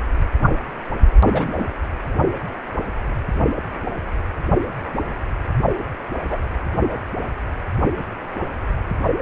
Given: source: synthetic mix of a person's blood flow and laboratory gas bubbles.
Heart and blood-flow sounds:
Doppler ultrasound of blood flow; precordium
1.32-1.52 s: bubbles
1.58-1.66 s: bubbles
6.29-6.38 s: bubbles
From the record:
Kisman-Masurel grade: 123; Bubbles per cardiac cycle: 1 to 2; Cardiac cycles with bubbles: 10 to 50%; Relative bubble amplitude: loud (0.450 to 0.775); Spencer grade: 2 (many but less than half of the cardiac periods contain bubble signals, singularly or in groups); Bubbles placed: only in the low amplitude regions of the cardiac cycle

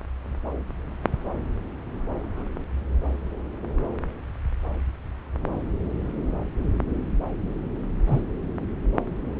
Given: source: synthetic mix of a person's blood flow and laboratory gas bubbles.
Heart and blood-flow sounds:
Doppler ultrasound of blood flow; subclavian vein
8.06-8.21 s: bubbles
From the record:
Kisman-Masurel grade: 113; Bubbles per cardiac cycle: 1 to 2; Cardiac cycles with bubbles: 1 to 10%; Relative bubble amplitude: loud (0.450 to 0.775); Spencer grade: 1 (occasional bubble signal discernible with the cardiac motion signal, with majority of cardiac periods free of bubbles); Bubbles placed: anywhere in the cardiac cycle

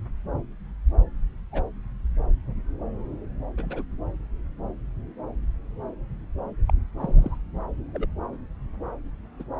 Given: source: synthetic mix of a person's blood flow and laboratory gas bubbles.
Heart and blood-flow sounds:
Doppler ultrasound of blood flow; subclavian vein
1.52-1.64 s: bubbles
3.58-3.85 s: bubbles
6.68-6.71 s: bubbles
6.98-7.36 s: bubbles
7.93-8.07 s: bubbles
9.40-9.43 s: bubbles
From the record:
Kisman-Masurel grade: 121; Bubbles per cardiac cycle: 1 to 2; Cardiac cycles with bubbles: 10 to 50%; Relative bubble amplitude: barely perceptible (0.100 to 0.250); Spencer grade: 2 (many but less than half of the cardiac periods contain bubble signals, singularly or in groups); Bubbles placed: anywhere in the cardiac cycle

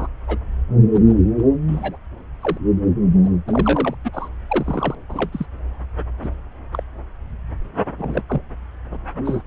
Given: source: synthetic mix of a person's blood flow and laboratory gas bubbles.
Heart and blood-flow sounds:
Doppler ultrasound of blood flow; subclavian vein
0.00-0.07 s: bubbles
0.27-0.38 s: bubbles
0.93-0.99 s: bubbles
1.04-1.12 s: bubbles
1.38-1.42 s: bubbles
1.68-1.97 s: bubbles
2.41-2.58 s: bubbles
3.23-3.30 s: bubbles
3.48-3.95 s: bubbles
4.04-4.28 s: bubbles
4.50-4.95 s: bubbles
5.08-5.46 s: bubbles
6.22-6.29 s: bubbles
6.73-6.83 s: bubbles
7.97-8.22 s: bubbles
8.29-8.41 s: bubbles
9.25-9.42 s: bubbles
From the record:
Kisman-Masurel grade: 242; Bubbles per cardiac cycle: several, 3 to 8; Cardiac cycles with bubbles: 100%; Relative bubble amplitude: moderate (0.250 to 0.450); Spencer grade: 3 (all of the cardiac periods contain showers or single bubble signals, but not dominating or overriding the cardiac motion signals); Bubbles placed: anywhere in the cardiac cycle

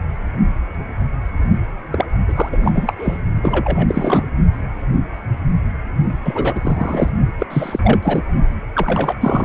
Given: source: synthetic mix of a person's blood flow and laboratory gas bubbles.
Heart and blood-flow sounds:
Doppler ultrasound of blood flow; precordium
1.92-2.06 s: bubbles
2.28-2.49 s: bubbles
2.52-2.57 s: bubbles
2.62-2.94 s: bubbles
2.98-3.19 s: bubbles
3.43-4.22 s: bubbles
6.22-7.10 s: bubbles
7.40-7.46 s: bubbles
7.50-7.79 s: bubbles
7.83-7.99 s: bubbles
8.02-8.21 s: bubbles
8.74-9.45 s: bubbles
From the record:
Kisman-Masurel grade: 333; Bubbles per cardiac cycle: rolling drumbeat, 9 or more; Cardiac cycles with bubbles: 50 to 99%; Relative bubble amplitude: loud (0.450 to 0.775); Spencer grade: 3 (all of the cardiac periods contain showers or single bubble signals, but not dominating or overriding the cardiac motion signals); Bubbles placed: only in the low amplitude regions of the cardiac cycle

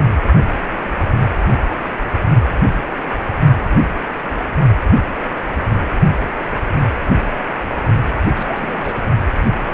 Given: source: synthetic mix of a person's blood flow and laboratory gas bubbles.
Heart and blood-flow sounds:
Doppler ultrasound of blood flow; precordium
8.35-9.04 s: bubbles
From the record:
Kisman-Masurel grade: 211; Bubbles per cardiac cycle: several, 3 to 8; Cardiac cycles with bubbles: 1 to 10%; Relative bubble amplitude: barely perceptible (0.100 to 0.250); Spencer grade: 1 (occasional bubble signal discernible with the cardiac motion signal, with majority of cardiac periods free of bubbles); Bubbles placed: only in the low amplitude regions of the cardiac cycle

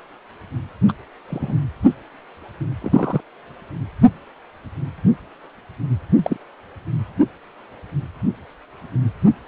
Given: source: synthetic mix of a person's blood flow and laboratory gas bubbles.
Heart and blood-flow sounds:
Doppler ultrasound of blood flow; precordium
0.88-0.91 s: bubbles
1.28-1.56 s: bubbles
2.80-3.21 s: bubbles
6.17-6.37 s: bubbles
From the record:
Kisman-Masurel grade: 122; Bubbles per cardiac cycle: 1 to 2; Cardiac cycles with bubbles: 10 to 50%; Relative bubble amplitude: moderate (0.250 to 0.450); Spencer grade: 2 (many but less than half of the cardiac periods contain bubble signals, singularly or in groups); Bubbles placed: anywhere in the cardiac cycle

